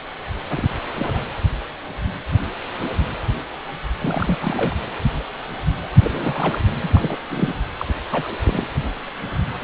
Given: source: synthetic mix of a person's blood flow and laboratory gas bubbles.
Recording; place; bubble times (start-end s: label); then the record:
Doppler ultrasound of blood flow; precordium
0.49-0.73 s: bubbles
0.91-1.22 s: bubbles
3.99-4.38 s: bubbles
4.41-4.77 s: bubbles
5.82-5.88 s: bubbles
6.03-6.64 s: bubbles
6.82-7.17 s: bubbles
7.30-7.55 s: bubbles
7.78-7.85 s: bubbles
7.88-7.94 s: bubbles
8.11-8.35 s: bubbles
8.44-8.68 s: bubbles
9.61-9.64 s: bubbles
From the record:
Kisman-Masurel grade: 221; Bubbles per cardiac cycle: several, 3 to 8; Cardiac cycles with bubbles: 10 to 50%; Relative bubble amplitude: barely perceptible (0.100 to 0.250); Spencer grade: 2 (many but less than half of the cardiac periods contain bubble signals, singularly or in groups); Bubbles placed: anywhere in the cardiac cycle